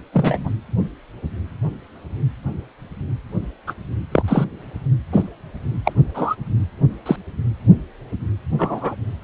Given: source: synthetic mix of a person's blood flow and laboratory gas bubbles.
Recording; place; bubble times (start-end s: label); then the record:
Doppler ultrasound of blood flow; precordium
0.12-0.54 s: bubbles
3.67-3.74 s: bubbles
4.12-4.23 s: bubbles
4.27-4.44 s: bubbles
5.12-5.22 s: bubbles
5.84-5.92 s: bubbles
6.14-6.35 s: bubbles
7.05-7.16 s: bubbles
8.58-8.95 s: bubbles
From the record:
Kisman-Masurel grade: 123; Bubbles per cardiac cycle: 1 to 2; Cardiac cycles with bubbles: 10 to 50%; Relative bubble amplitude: loud (0.450 to 0.775); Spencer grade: 2 (many but less than half of the cardiac periods contain bubble signals, singularly or in groups); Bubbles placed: anywhere in the cardiac cycle